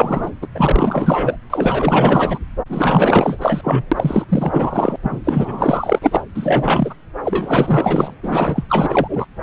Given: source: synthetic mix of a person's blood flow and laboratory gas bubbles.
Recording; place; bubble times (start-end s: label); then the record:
Doppler ultrasound of blood flow; subclavian vein
0.00-0.31 s: bubbles
0.42-0.47 s: bubbles
0.55-1.36 s: bubbles
1.50-2.38 s: bubbles
2.69-3.37 s: bubbles
3.41-3.82 s: bubbles
3.91-4.25 s: bubbles
4.29-4.96 s: bubbles
5.03-5.22 s: bubbles
5.24-6.21 s: bubbles
6.35-6.95 s: bubbles
7.24-8.13 s: bubbles
8.22-8.64 s: bubbles
8.68-9.26 s: bubbles
From the record:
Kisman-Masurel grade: 444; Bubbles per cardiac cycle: continuous sound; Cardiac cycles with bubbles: 100%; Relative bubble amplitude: maximal (0.775 to 0.999); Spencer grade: 4 (maximum detectable bubble signal sounding continuously throughout systole and diastole of every cardiac period, and overriding the amplitude of the normal cardiac signals); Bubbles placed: anywhere in the cardiac cycle